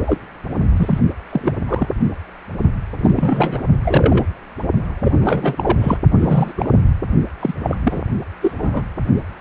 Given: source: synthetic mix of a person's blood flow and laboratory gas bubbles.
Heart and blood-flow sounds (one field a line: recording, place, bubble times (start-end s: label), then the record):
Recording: Doppler ultrasound of blood flow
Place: precordium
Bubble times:
0.07-0.18 s: bubbles
0.76-0.99 s: bubbles
1.29-1.56 s: bubbles
1.67-1.89 s: bubbles
2.98-3.62 s: bubbles
3.85-4.25 s: bubbles
5.00-5.12 s: bubbles
5.21-5.98 s: bubbles
6.20-6.53 s: bubbles
6.56-6.76 s: bubbles
7.40-7.53 s: bubbles
7.63-7.78 s: bubbles
7.83-8.02 s: bubbles
8.42-8.55 s: bubbles
8.58-8.82 s: bubbles
From the record:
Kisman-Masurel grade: 233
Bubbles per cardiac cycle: several, 3 to 8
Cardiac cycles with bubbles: 50 to 99%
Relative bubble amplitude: loud (0.450 to 0.775)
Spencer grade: 3 (all of the cardiac periods contain showers or single bubble signals, but not dominating or overriding the cardiac motion signals)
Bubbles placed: only in the low amplitude regions of the cardiac cycle